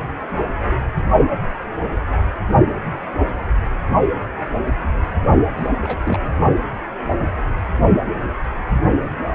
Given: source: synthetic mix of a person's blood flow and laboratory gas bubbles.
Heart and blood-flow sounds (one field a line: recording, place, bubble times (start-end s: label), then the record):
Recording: Doppler ultrasound of blood flow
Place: precordium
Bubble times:
5.57-5.69 s: bubbles
5.81-5.96 s: bubbles
6.02-6.29 s: bubbles
From the record:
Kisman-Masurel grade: 212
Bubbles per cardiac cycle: several, 3 to 8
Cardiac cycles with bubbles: 1 to 10%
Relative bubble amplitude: moderate (0.250 to 0.450)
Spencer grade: 1 (occasional bubble signal discernible with the cardiac motion signal, with majority of cardiac periods free of bubbles)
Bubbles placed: only in the low amplitude regions of the cardiac cycle